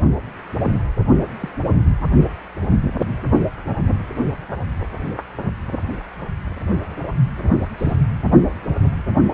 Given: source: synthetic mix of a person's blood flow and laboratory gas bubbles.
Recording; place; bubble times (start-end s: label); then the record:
Doppler ultrasound of blood flow; precordium
0.64-0.73 s: bubbles
1.40-1.49 s: bubbles
7.78-7.96 s: bubbles
From the record:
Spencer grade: 2 (many but less than half of the cardiac periods contain bubble signals, singularly or in groups); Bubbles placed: only in the low amplitude regions of the cardiac cycle